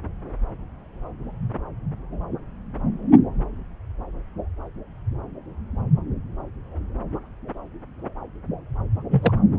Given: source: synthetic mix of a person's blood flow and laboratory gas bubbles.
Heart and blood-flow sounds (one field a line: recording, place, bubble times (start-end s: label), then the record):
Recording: Doppler ultrasound of blood flow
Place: subclavian vein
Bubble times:
9.11-9.31 s: bubbles
From the record:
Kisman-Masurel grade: 122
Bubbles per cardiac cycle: 1 to 2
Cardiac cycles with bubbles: 10 to 50%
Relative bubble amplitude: moderate (0.250 to 0.450)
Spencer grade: 2 (many but less than half of the cardiac periods contain bubble signals, singularly or in groups)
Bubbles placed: anywhere in the cardiac cycle